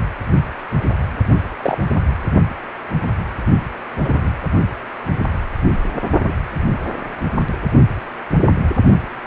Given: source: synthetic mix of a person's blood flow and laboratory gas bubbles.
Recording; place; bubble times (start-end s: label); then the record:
Doppler ultrasound of blood flow; precordium
1.62-1.77 s: bubbles
4.04-4.32 s: bubbles
6.26-6.33 s: bubbles
From the record:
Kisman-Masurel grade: 122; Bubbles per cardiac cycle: 1 to 2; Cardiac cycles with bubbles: 10 to 50%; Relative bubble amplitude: moderate (0.250 to 0.450); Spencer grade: 2 (many but less than half of the cardiac periods contain bubble signals, singularly or in groups); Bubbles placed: only in the low amplitude regions of the cardiac cycle